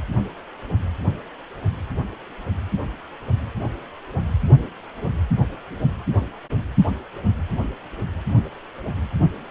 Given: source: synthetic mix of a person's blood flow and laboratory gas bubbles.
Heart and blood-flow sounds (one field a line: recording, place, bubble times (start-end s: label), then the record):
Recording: Doppler ultrasound of blood flow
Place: precordium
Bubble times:
no bubbles
From the record:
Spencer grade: 0 (complete lack of bubble signals)